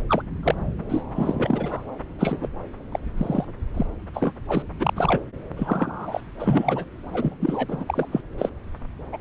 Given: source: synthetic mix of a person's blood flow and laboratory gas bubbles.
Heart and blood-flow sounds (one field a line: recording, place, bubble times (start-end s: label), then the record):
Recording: Doppler ultrasound of blood flow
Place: subclavian vein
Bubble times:
0.09-0.22 s: bubbles
0.43-0.55 s: bubbles
0.89-1.04 s: bubbles
1.15-1.85 s: bubbles
2.19-2.48 s: bubbles
2.92-3.00 s: bubbles
3.17-3.45 s: bubbles
3.74-3.86 s: bubbles
4.13-4.33 s: bubbles
4.48-4.62 s: bubbles
4.79-5.21 s: bubbles
5.56-6.21 s: bubbles
6.38-6.85 s: bubbles
7.12-7.34 s: bubbles
7.40-7.84 s: bubbles
7.88-8.07 s: bubbles
8.12-8.21 s: bubbles
8.38-8.49 s: bubbles
9.12-9.21 s: bubbles
From the record:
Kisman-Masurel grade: 242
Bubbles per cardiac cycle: several, 3 to 8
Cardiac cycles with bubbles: 100%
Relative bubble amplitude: moderate (0.250 to 0.450)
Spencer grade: 3 (all of the cardiac periods contain showers or single bubble signals, but not dominating or overriding the cardiac motion signals)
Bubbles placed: anywhere in the cardiac cycle